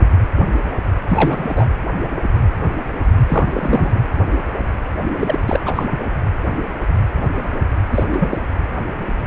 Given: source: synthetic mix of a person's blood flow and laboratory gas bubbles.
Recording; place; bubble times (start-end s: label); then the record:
Doppler ultrasound of blood flow; precordium
1.07-1.66 s: bubbles
3.27-3.50 s: bubbles
3.54-4.00 s: bubbles
5.11-5.40 s: bubbles
5.46-5.60 s: bubbles
5.66-5.85 s: bubbles
5.90-6.08 s: bubbles
7.91-8.04 s: bubbles
8.12-8.38 s: bubbles
From the record:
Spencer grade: 2 (many but less than half of the cardiac periods contain bubble signals, singularly or in groups); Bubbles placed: anywhere in the cardiac cycle